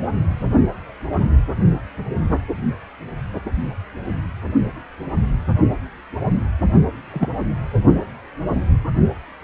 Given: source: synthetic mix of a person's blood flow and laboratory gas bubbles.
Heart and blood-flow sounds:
Doppler ultrasound of blood flow; precordium
7.13-7.28 s: bubbles
From the record:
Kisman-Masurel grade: 113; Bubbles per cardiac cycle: 1 to 2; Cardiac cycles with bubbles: 1 to 10%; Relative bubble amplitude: loud (0.450 to 0.775); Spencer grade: 1 (occasional bubble signal discernible with the cardiac motion signal, with majority of cardiac periods free of bubbles); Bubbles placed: only in the low amplitude regions of the cardiac cycle

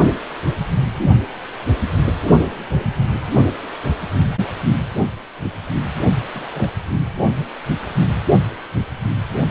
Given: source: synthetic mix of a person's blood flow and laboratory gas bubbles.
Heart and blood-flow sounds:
Doppler ultrasound of blood flow; precordium
6.31-6.71 s: bubbles
From the record:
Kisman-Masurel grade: 221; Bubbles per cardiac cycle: several, 3 to 8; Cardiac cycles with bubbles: 10 to 50%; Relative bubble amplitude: barely perceptible (0.100 to 0.250); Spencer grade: 2 (many but less than half of the cardiac periods contain bubble signals, singularly or in groups); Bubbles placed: only in the low amplitude regions of the cardiac cycle

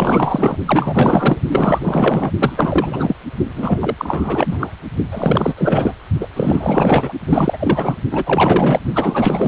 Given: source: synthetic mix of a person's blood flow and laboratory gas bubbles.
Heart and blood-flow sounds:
Doppler ultrasound of blood flow; precordium
0.00-0.56 s: bubbles
0.66-1.40 s: bubbles
1.49-2.31 s: bubbles
2.40-3.16 s: bubbles
3.55-3.95 s: bubbles
3.98-4.75 s: bubbles
5.12-5.54 s: bubbles
5.57-5.94 s: bubbles
6.21-6.28 s: bubbles
6.36-7.12 s: bubbles
7.27-7.98 s: bubbles
8.11-8.79 s: bubbles
8.93-9.48 s: bubbles
From the record:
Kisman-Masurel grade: 444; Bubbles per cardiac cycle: continuous sound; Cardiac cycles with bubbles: 100%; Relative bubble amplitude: maximal (0.775 to 0.999); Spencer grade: 4 (maximum detectable bubble signal sounding continuously throughout systole and diastole of every cardiac period, and overriding the amplitude of the normal cardiac signals); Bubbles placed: only in the low amplitude regions of the cardiac cycle

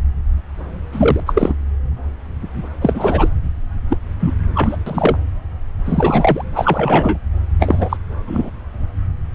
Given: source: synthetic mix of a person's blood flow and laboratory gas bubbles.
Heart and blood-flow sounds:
Doppler ultrasound of blood flow; subclavian vein
0.92-1.20 s: bubbles
1.26-1.54 s: bubbles
2.81-3.29 s: bubbles
3.90-3.97 s: bubbles
4.20-4.34 s: bubbles
4.53-4.77 s: bubbles
4.86-5.17 s: bubbles
5.86-6.45 s: bubbles
6.51-7.17 s: bubbles
7.59-7.97 s: bubbles
8.27-8.51 s: bubbles
From the record:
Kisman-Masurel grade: 223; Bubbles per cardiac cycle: several, 3 to 8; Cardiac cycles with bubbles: 10 to 50%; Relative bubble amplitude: loud (0.450 to 0.775); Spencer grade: 2 (many but less than half of the cardiac periods contain bubble signals, singularly or in groups); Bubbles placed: anywhere in the cardiac cycle

